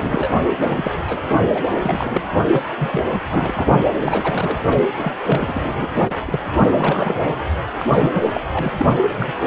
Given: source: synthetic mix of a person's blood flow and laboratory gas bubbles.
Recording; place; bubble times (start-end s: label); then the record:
Doppler ultrasound of blood flow; precordium
0.00-0.33 s: bubbles
0.36-0.44 s: bubbles
0.60-0.91 s: bubbles
1.07-1.19 s: bubbles
1.54-1.63 s: bubbles
1.71-1.75 s: bubbles
1.79-2.22 s: bubbles
2.51-2.62 s: bubbles
2.77-3.04 s: bubbles
3.12-3.21 s: bubbles
3.29-3.69 s: bubbles
4.02-4.58 s: bubbles
4.71-4.83 s: bubbles
4.96-5.12 s: bubbles
5.23-5.62 s: bubbles
5.64-5.72 s: bubbles
5.75-6.16 s: bubbles
6.25-6.40 s: bubbles
6.69-7.35 s: bubbles
7.79-7.89 s: bubbles
7.97-8.41 s: bubbles
8.52-8.74 s: bubbles
8.77-8.86 s: bubbles
9.09-9.32 s: bubbles
From the record:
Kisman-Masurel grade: 342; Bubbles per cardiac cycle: rolling drumbeat, 9 or more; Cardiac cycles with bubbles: 100%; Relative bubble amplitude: moderate (0.250 to 0.450); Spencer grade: 3 (all of the cardiac periods contain showers or single bubble signals, but not dominating or overriding the cardiac motion signals); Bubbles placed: anywhere in the cardiac cycle